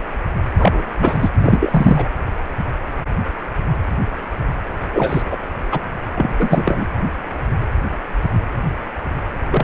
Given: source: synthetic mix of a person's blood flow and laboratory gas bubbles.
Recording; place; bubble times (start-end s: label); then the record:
Doppler ultrasound of blood flow; precordium
0.57-0.82 s: bubbles
0.98-1.30 s: bubbles
1.39-2.07 s: bubbles
4.93-5.22 s: bubbles
5.31-5.37 s: bubbles
5.71-5.80 s: bubbles
6.15-6.33 s: bubbles
6.39-6.87 s: bubbles
9.50-9.64 s: bubbles
From the record:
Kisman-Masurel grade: 223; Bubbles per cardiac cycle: several, 3 to 8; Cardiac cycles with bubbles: 10 to 50%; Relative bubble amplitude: loud (0.450 to 0.775); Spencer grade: 2 (many but less than half of the cardiac periods contain bubble signals, singularly or in groups); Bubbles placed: anywhere in the cardiac cycle